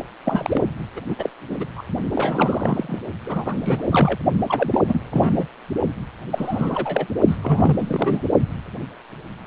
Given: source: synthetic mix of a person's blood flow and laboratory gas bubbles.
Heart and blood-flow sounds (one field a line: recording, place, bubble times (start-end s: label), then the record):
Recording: Doppler ultrasound of blood flow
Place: precordium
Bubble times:
0.24-0.62 s: bubbles
0.96-1.00 s: bubbles
1.08-1.16 s: bubbles
1.19-1.30 s: bubbles
1.50-1.65 s: bubbles
1.75-1.83 s: bubbles
2.12-2.98 s: bubbles
3.25-3.56 s: bubbles
3.60-3.82 s: bubbles
3.90-4.18 s: bubbles
4.48-4.80 s: bubbles
4.88-5.01 s: bubbles
5.10-5.47 s: bubbles
6.30-7.06 s: bubbles
7.27-7.36 s: bubbles
7.42-7.76 s: bubbles
7.79-8.21 s: bubbles
From the record:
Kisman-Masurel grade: 332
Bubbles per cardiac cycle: rolling drumbeat, 9 or more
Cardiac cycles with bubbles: 50 to 99%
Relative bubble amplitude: moderate (0.250 to 0.450)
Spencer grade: 3 (all of the cardiac periods contain showers or single bubble signals, but not dominating or overriding the cardiac motion signals)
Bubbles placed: only in the low amplitude regions of the cardiac cycle